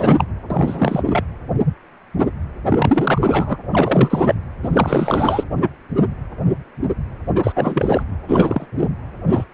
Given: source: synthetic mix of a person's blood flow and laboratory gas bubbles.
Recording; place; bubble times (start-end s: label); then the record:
Doppler ultrasound of blood flow; precordium
0.00-0.24 s: bubbles
0.50-1.02 s: bubbles
1.06-1.23 s: bubbles
2.69-3.56 s: bubbles
3.73-4.35 s: bubbles
4.63-5.44 s: bubbles
7.35-7.52 s: bubbles
7.55-8.03 s: bubbles
8.28-8.66 s: bubbles
8.77-8.88 s: bubbles
9.29-9.44 s: bubbles
From the record:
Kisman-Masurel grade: 333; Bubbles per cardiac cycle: rolling drumbeat, 9 or more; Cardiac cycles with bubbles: 50 to 99%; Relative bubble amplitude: loud (0.450 to 0.775); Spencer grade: 3 (all of the cardiac periods contain showers or single bubble signals, but not dominating or overriding the cardiac motion signals); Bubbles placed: anywhere in the cardiac cycle